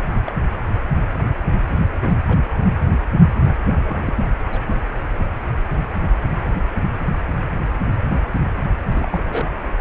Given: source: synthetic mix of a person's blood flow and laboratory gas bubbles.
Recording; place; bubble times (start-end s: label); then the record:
Doppler ultrasound of blood flow; precordium
0.26-0.32 s: bubbles
1.69-1.73 s: bubbles
2.00-2.15 s: bubbles
2.27-2.38 s: bubbles
3.85-4.02 s: bubbles
4.06-4.15 s: bubbles
4.53-4.60 s: bubbles
8.95-9.51 s: bubbles
From the record:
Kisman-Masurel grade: 121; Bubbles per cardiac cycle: 1 to 2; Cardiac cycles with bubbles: 10 to 50%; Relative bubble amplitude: barely perceptible (0.100 to 0.250); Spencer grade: 2 (many but less than half of the cardiac periods contain bubble signals, singularly or in groups); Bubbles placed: anywhere in the cardiac cycle